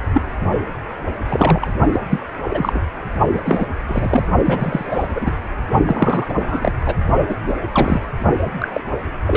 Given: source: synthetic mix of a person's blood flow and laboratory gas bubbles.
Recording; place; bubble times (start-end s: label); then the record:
Doppler ultrasound of blood flow; precordium
0.13-0.22 s: bubbles
1.29-1.71 s: bubbles
1.93-2.00 s: bubbles
2.10-2.20 s: bubbles
2.50-2.81 s: bubbles
3.34-3.40 s: bubbles
3.45-3.66 s: bubbles
3.88-4.28 s: bubbles
4.45-5.08 s: bubbles
5.15-5.31 s: bubbles
5.85-6.71 s: bubbles
6.85-6.94 s: bubbles
7.28-7.36 s: bubbles
7.47-7.53 s: bubbles
7.72-8.00 s: bubbles
8.60-8.68 s: bubbles
8.72-8.80 s: bubbles
9.27-9.37 s: bubbles
From the record:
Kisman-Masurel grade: 242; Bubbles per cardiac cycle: several, 3 to 8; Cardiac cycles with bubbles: 100%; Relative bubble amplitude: moderate (0.250 to 0.450); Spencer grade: 3 (all of the cardiac periods contain showers or single bubble signals, but not dominating or overriding the cardiac motion signals); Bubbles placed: only in the low amplitude regions of the cardiac cycle